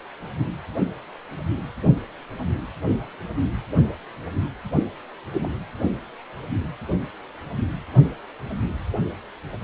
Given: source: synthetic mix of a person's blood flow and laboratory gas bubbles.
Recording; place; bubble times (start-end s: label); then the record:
Doppler ultrasound of blood flow; precordium
5.33-5.49 s: bubbles
From the record:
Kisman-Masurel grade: 211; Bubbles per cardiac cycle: several, 3 to 8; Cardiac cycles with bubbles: 1 to 10%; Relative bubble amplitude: barely perceptible (0.100 to 0.250); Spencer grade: 1 (occasional bubble signal discernible with the cardiac motion signal, with majority of cardiac periods free of bubbles); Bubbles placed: anywhere in the cardiac cycle